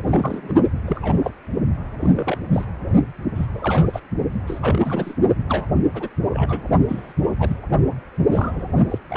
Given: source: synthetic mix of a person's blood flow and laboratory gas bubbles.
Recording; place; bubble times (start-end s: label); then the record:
Doppler ultrasound of blood flow; precordium
0.07-0.54 s: bubbles
0.86-1.31 s: bubbles
2.01-2.10 s: bubbles
2.13-2.38 s: bubbles
2.52-2.65 s: bubbles
3.35-3.46 s: bubbles
3.53-4.00 s: bubbles
4.46-5.14 s: bubbles
5.49-5.67 s: bubbles
5.93-6.09 s: bubbles
6.31-6.68 s: bubbles
6.88-7.12 s: bubbles
7.39-7.56 s: bubbles
8.27-8.68 s: bubbles
8.89-8.98 s: bubbles
9.10-9.17 s: bubbles
From the record:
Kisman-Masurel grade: 242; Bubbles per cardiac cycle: several, 3 to 8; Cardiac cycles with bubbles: 100%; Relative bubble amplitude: moderate (0.250 to 0.450); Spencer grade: 3 (all of the cardiac periods contain showers or single bubble signals, but not dominating or overriding the cardiac motion signals); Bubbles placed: only in the low amplitude regions of the cardiac cycle